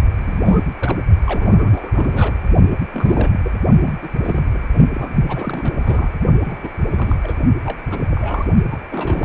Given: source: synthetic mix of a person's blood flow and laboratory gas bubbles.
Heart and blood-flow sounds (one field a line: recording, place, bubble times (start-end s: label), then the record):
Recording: Doppler ultrasound of blood flow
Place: precordium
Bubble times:
0.11-0.75 s: bubbles
0.80-0.98 s: bubbles
1.26-2.42 s: bubbles
2.71-2.76 s: bubbles
2.92-3.40 s: bubbles
3.44-3.51 s: bubbles
3.81-3.94 s: bubbles
4.02-4.08 s: bubbles
4.23-4.58 s: bubbles
4.78-4.84 s: bubbles
4.95-5.11 s: bubbles
5.28-6.12 s: bubbles
6.44-6.69 s: bubbles
6.92-7.18 s: bubbles
7.23-7.37 s: bubbles
7.64-7.78 s: bubbles
7.91-8.04 s: bubbles
8.10-8.46 s: bubbles
8.69-8.79 s: bubbles
8.90-9.25 s: bubbles
From the record:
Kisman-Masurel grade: 342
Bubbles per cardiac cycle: rolling drumbeat, 9 or more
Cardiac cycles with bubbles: 100%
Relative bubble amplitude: moderate (0.250 to 0.450)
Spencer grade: 3 (all of the cardiac periods contain showers or single bubble signals, but not dominating or overriding the cardiac motion signals)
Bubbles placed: only in the low amplitude regions of the cardiac cycle